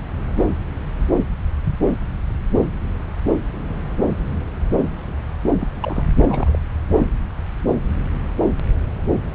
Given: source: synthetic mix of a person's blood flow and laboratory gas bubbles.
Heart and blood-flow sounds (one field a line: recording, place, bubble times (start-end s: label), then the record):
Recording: Doppler ultrasound of blood flow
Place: subclavian vein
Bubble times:
5.46-5.54 s: bubbles
5.60-5.67 s: bubbles
5.82-6.04 s: bubbles
6.23-6.56 s: bubbles
From the record:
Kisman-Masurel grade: 221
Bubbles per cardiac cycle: several, 3 to 8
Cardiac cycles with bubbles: 10 to 50%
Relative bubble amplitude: barely perceptible (0.100 to 0.250)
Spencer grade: 2 (many but less than half of the cardiac periods contain bubble signals, singularly or in groups)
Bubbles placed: anywhere in the cardiac cycle